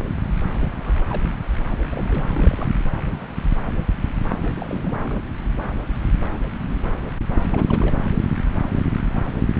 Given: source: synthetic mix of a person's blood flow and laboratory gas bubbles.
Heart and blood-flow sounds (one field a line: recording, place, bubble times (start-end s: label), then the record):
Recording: Doppler ultrasound of blood flow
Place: subclavian vein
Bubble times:
0.58-0.67 s: bubbles
0.79-1.06 s: bubbles
1.09-1.22 s: bubbles
1.91-2.71 s: bubbles
4.42-4.52 s: bubbles
4.56-5.00 s: bubbles
5.04-5.21 s: bubbles
7.50-7.96 s: bubbles
From the record:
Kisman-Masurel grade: 221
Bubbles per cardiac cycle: several, 3 to 8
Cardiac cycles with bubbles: 10 to 50%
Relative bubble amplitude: barely perceptible (0.100 to 0.250)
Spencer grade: 2 (many but less than half of the cardiac periods contain bubble signals, singularly or in groups)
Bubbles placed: anywhere in the cardiac cycle